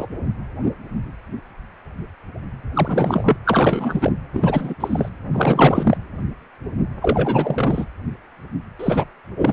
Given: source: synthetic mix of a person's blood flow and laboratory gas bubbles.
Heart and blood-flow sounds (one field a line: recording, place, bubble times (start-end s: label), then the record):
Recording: Doppler ultrasound of blood flow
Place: precordium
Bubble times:
0.00-0.06 s: bubbles
2.73-3.36 s: bubbles
3.46-4.12 s: bubbles
4.33-4.75 s: bubbles
4.80-5.09 s: bubbles
5.33-5.97 s: bubbles
7.01-7.85 s: bubbles
8.79-9.05 s: bubbles
9.36-9.53 s: bubbles
From the record:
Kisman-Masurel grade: 333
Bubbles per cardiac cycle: rolling drumbeat, 9 or more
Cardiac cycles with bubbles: 50 to 99%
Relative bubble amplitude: loud (0.450 to 0.775)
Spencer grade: 3 (all of the cardiac periods contain showers or single bubble signals, but not dominating or overriding the cardiac motion signals)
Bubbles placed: anywhere in the cardiac cycle